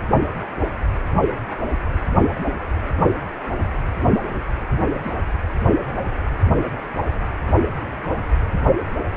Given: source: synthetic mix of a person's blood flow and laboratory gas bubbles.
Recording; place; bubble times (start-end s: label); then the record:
Doppler ultrasound of blood flow; precordium
4.71-4.75 s: bubbles
5.03-5.12 s: bubbles
From the record:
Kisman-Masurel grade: 111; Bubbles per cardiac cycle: 1 to 2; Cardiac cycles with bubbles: 1 to 10%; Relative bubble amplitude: barely perceptible (0.100 to 0.250); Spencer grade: 1 (occasional bubble signal discernible with the cardiac motion signal, with majority of cardiac periods free of bubbles); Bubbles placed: anywhere in the cardiac cycle